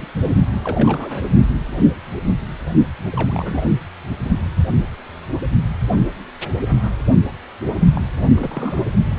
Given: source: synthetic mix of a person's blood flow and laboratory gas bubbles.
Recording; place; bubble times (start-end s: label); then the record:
Doppler ultrasound of blood flow; precordium
0.00-0.06 s: bubbles
0.64-1.28 s: bubbles
3.12-3.70 s: bubbles
7.94-8.01 s: bubbles
8.15-8.27 s: bubbles
8.35-8.81 s: bubbles
From the record:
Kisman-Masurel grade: 221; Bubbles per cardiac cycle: several, 3 to 8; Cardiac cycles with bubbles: 10 to 50%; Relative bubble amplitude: barely perceptible (0.100 to 0.250); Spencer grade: 2 (many but less than half of the cardiac periods contain bubble signals, singularly or in groups); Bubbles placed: only in the low amplitude regions of the cardiac cycle